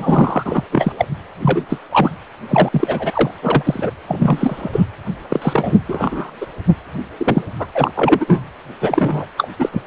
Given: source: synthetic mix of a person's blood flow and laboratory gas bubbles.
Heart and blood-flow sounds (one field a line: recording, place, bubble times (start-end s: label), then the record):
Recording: Doppler ultrasound of blood flow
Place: precordium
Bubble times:
0.00-0.43 s: bubbles
0.46-0.64 s: bubbles
0.72-0.92 s: bubbles
0.98-1.05 s: bubbles
1.41-1.64 s: bubbles
1.69-1.80 s: bubbles
1.91-2.12 s: bubbles
2.49-2.70 s: bubbles
2.72-3.31 s: bubbles
3.41-3.90 s: bubbles
4.08-4.70 s: bubbles
4.73-4.84 s: bubbles
5.29-5.79 s: bubbles
5.88-6.30 s: bubbles
6.41-6.46 s: bubbles
7.18-7.42 s: bubbles
7.58-7.67 s: bubbles
7.75-7.92 s: bubbles
7.95-8.43 s: bubbles
8.80-9.26 s: bubbles
9.37-9.48 s: bubbles
9.60-9.82 s: bubbles
From the record:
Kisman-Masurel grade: 243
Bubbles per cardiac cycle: several, 3 to 8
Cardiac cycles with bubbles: 100%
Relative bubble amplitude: loud (0.450 to 0.775)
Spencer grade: 3 (all of the cardiac periods contain showers or single bubble signals, but not dominating or overriding the cardiac motion signals)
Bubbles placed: anywhere in the cardiac cycle